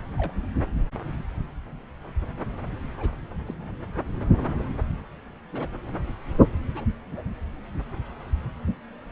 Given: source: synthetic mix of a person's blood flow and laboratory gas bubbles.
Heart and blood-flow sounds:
Doppler ultrasound of blood flow; subclavian vein
0.18-0.33 s: bubbles
2.97-3.17 s: bubbles
3.46-3.54 s: bubbles
5.52-5.68 s: bubbles
6.75-6.85 s: bubbles
From the record:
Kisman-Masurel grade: 121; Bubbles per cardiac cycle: 1 to 2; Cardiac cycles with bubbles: 10 to 50%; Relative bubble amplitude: barely perceptible (0.100 to 0.250); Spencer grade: 2 (many but less than half of the cardiac periods contain bubble signals, singularly or in groups); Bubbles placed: anywhere in the cardiac cycle

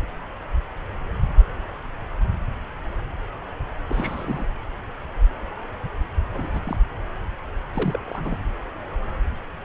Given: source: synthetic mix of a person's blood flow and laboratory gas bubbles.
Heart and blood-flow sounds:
Doppler ultrasound of blood flow; subclavian vein
3.89-4.46 s: bubbles
6.34-6.60 s: bubbles
6.63-6.79 s: bubbles
7.74-8.00 s: bubbles
8.06-8.38 s: bubbles
From the record:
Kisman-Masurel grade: 221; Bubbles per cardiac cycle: several, 3 to 8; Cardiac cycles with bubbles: 10 to 50%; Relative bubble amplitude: barely perceptible (0.100 to 0.250); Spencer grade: 2 (many but less than half of the cardiac periods contain bubble signals, singularly or in groups); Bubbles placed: anywhere in the cardiac cycle

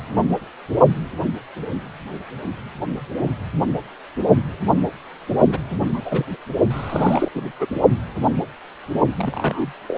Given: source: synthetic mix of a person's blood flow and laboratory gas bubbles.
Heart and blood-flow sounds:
Doppler ultrasound of blood flow; precordium
5.47-5.58 s: bubbles
5.70-6.01 s: bubbles
6.05-6.25 s: bubbles
6.71-7.29 s: bubbles
7.34-7.51 s: bubbles
7.60-7.67 s: bubbles
9.16-9.72 s: bubbles
9.88-9.98 s: bubbles
From the record:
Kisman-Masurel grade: 222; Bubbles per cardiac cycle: several, 3 to 8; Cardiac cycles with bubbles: 10 to 50%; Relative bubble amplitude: moderate (0.250 to 0.450); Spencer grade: 2 (many but less than half of the cardiac periods contain bubble signals, singularly or in groups); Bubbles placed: only in the low amplitude regions of the cardiac cycle

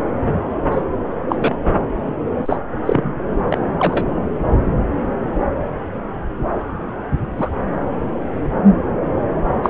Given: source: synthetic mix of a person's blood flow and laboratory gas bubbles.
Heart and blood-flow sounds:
Doppler ultrasound of blood flow; subclavian vein
0.71-0.83 s: bubbles
1.28-1.36 s: bubbles
1.40-1.57 s: bubbles
2.07-2.12 s: bubbles
2.46-2.56 s: bubbles
2.85-3.12 s: bubbles
3.50-3.58 s: bubbles
3.79-4.05 s: bubbles
7.36-7.50 s: bubbles
9.63-9.70 s: bubbles
From the record:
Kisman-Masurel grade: 123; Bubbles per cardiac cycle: 1 to 2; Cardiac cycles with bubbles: 10 to 50%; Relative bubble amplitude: loud (0.450 to 0.775); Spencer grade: 2 (many but less than half of the cardiac periods contain bubble signals, singularly or in groups); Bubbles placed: anywhere in the cardiac cycle

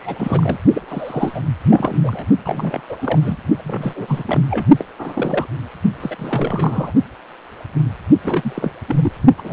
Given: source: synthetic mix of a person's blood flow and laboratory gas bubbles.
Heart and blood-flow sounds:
Doppler ultrasound of blood flow; precordium
0.00-0.57 s: bubbles
0.73-0.81 s: bubbles
0.88-1.41 s: bubbles
1.69-1.97 s: bubbles
2.03-2.25 s: bubbles
2.44-2.80 s: bubbles
2.90-2.97 s: bubbles
3.01-3.19 s: bubbles
3.22-3.38 s: bubbles
3.58-4.23 s: bubbles
4.26-4.43 s: bubbles
4.50-4.65 s: bubbles
4.78-4.84 s: bubbles
4.98-5.46 s: bubbles
6.00-6.93 s: bubbles
8.21-8.71 s: bubbles
8.88-9.12 s: bubbles
9.38-9.53 s: bubbles
From the record:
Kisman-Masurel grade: 332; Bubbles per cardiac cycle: rolling drumbeat, 9 or more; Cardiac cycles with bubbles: 50 to 99%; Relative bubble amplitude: moderate (0.250 to 0.450); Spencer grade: 3 (all of the cardiac periods contain showers or single bubble signals, but not dominating or overriding the cardiac motion signals); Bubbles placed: only in the low amplitude regions of the cardiac cycle

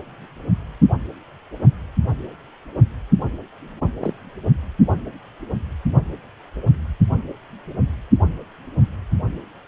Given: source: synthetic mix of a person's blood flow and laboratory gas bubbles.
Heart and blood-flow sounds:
Doppler ultrasound of blood flow; precordium
4.00-4.14 s: bubbles
From the record:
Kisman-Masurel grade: 112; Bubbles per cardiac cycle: 1 to 2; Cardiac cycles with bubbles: 1 to 10%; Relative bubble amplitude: moderate (0.250 to 0.450); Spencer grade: 1 (occasional bubble signal discernible with the cardiac motion signal, with majority of cardiac periods free of bubbles); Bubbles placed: anywhere in the cardiac cycle

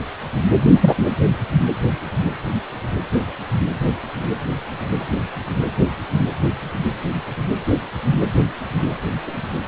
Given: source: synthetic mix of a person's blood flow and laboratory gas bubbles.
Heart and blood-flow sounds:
Doppler ultrasound of blood flow; precordium
0.80-0.95 s: bubbles
From the record:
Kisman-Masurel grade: 113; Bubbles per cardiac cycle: 1 to 2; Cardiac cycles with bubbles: 1 to 10%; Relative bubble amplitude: loud (0.450 to 0.775); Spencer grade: 1 (occasional bubble signal discernible with the cardiac motion signal, with majority of cardiac periods free of bubbles); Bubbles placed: anywhere in the cardiac cycle

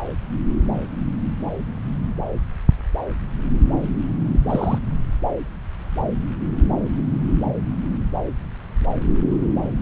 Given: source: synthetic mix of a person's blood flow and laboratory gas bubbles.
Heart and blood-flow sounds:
Doppler ultrasound of blood flow; subclavian vein
4.33-4.40 s: bubbles
4.49-4.79 s: bubbles
From the record:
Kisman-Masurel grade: 112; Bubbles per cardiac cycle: 1 to 2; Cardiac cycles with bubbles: 1 to 10%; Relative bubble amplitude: moderate (0.250 to 0.450); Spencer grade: 1 (occasional bubble signal discernible with the cardiac motion signal, with majority of cardiac periods free of bubbles); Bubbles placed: anywhere in the cardiac cycle

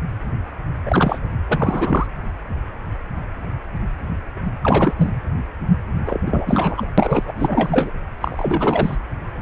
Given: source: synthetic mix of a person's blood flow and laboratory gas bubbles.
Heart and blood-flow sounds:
Doppler ultrasound of blood flow; precordium
0.85-1.25 s: bubbles
1.48-2.07 s: bubbles
4.62-5.10 s: bubbles
6.05-6.21 s: bubbles
6.26-6.86 s: bubbles
6.98-7.32 s: bubbles
7.38-7.91 s: bubbles
8.21-8.97 s: bubbles
From the record:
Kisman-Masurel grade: 333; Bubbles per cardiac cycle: rolling drumbeat, 9 or more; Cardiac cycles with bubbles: 50 to 99%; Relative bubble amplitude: loud (0.450 to 0.775); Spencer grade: 3 (all of the cardiac periods contain showers or single bubble signals, but not dominating or overriding the cardiac motion signals); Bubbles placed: anywhere in the cardiac cycle

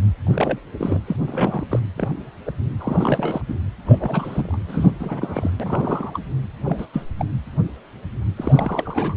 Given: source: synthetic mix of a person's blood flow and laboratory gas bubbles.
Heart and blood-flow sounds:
Doppler ultrasound of blood flow; precordium
0.24-0.59 s: bubbles
0.79-1.00 s: bubbles
1.06-1.17 s: bubbles
1.27-1.79 s: bubbles
1.97-2.17 s: bubbles
2.46-2.52 s: bubbles
2.79-3.42 s: bubbles
3.48-3.54 s: bubbles
3.85-4.58 s: bubbles
4.66-4.92 s: bubbles
5.00-5.50 s: bubbles
5.60-6.19 s: bubbles
6.65-6.86 s: bubbles
6.93-7.04 s: bubbles
7.19-7.25 s: bubbles
8.36-9.14 s: bubbles
From the record:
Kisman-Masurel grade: 232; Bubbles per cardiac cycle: several, 3 to 8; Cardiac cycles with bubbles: 50 to 99%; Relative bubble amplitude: moderate (0.250 to 0.450); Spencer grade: 3 (all of the cardiac periods contain showers or single bubble signals, but not dominating or overriding the cardiac motion signals); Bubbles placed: anywhere in the cardiac cycle

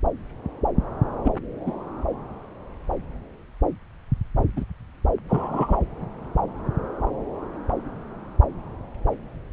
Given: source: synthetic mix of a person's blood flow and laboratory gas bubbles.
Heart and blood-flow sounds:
Doppler ultrasound of blood flow; subclavian vein
1.25-1.31 s: bubbles
1.66-1.75 s: bubbles
4.56-4.65 s: bubbles
5.29-5.78 s: bubbles
From the record:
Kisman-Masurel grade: 122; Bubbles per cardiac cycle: 1 to 2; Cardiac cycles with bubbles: 10 to 50%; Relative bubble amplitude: moderate (0.250 to 0.450); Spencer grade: 2 (many but less than half of the cardiac periods contain bubble signals, singularly or in groups); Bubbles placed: anywhere in the cardiac cycle

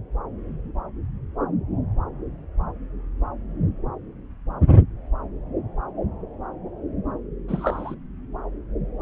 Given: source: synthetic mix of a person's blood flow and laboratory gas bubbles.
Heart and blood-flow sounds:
Doppler ultrasound of blood flow; subclavian vein
7.48-7.95 s: bubbles
From the record:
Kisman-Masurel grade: 123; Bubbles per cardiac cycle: 1 to 2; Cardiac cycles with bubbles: 10 to 50%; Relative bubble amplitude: loud (0.450 to 0.775); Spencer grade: 2 (many but less than half of the cardiac periods contain bubble signals, singularly or in groups); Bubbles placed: anywhere in the cardiac cycle

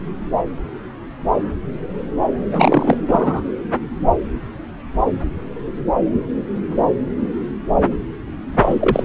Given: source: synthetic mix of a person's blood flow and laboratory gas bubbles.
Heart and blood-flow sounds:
Doppler ultrasound of blood flow; subclavian vein
2.51-2.97 s: bubbles
3.08-3.42 s: bubbles
8.61-9.04 s: bubbles
From the record:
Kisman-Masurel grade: 223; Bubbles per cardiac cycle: several, 3 to 8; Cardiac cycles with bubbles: 10 to 50%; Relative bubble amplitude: loud (0.450 to 0.775); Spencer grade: 2 (many but less than half of the cardiac periods contain bubble signals, singularly or in groups); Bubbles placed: anywhere in the cardiac cycle

